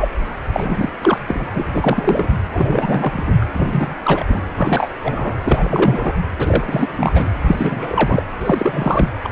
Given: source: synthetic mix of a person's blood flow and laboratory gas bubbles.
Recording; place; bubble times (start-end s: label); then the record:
Doppler ultrasound of blood flow; precordium
0.00-0.09 s: bubbles
0.52-0.92 s: bubbles
1.01-1.20 s: bubbles
1.26-1.44 s: bubbles
1.54-2.29 s: bubbles
2.53-3.37 s: bubbles
3.41-3.46 s: bubbles
3.53-3.95 s: bubbles
4.04-4.47 s: bubbles
4.56-4.90 s: bubbles
5.02-5.39 s: bubbles
5.44-6.13 s: bubbles
6.38-7.32 s: bubbles
7.47-8.22 s: bubbles
8.40-9.09 s: bubbles
9.23-9.32 s: bubbles
From the record:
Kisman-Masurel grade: 343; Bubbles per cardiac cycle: rolling drumbeat, 9 or more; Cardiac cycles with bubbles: 100%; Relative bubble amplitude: loud (0.450 to 0.775); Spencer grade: 3 (all of the cardiac periods contain showers or single bubble signals, but not dominating or overriding the cardiac motion signals); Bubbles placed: anywhere in the cardiac cycle